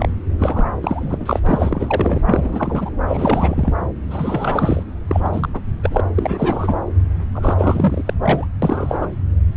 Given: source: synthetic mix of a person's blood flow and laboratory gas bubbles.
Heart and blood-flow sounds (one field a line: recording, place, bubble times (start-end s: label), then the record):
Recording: Doppler ultrasound of blood flow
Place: subclavian vein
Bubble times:
0.00-0.09 s: bubbles
0.39-0.68 s: bubbles
0.83-1.40 s: bubbles
1.46-2.21 s: bubbles
2.26-2.90 s: bubbles
3.07-3.72 s: bubbles
4.03-4.83 s: bubbles
5.08-5.49 s: bubbles
5.54-5.62 s: bubbles
5.83-6.00 s: bubbles
6.16-6.75 s: bubbles
7.34-8.03 s: bubbles
8.06-8.14 s: bubbles
8.23-8.47 s: bubbles
8.62-9.10 s: bubbles
From the record:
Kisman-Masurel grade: 343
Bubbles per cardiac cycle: rolling drumbeat, 9 or more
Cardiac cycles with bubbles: 100%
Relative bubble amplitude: loud (0.450 to 0.775)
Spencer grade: 3 (all of the cardiac periods contain showers or single bubble signals, but not dominating or overriding the cardiac motion signals)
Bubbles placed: anywhere in the cardiac cycle